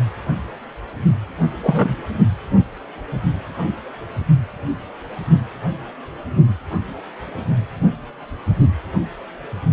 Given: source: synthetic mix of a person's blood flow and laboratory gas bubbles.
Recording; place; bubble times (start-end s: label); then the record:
Doppler ultrasound of blood flow; precordium
1.62-1.95 s: bubbles
From the record:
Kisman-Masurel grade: 113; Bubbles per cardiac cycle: 1 to 2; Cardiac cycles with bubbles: 1 to 10%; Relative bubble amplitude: loud (0.450 to 0.775); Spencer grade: 1 (occasional bubble signal discernible with the cardiac motion signal, with majority of cardiac periods free of bubbles); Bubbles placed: anywhere in the cardiac cycle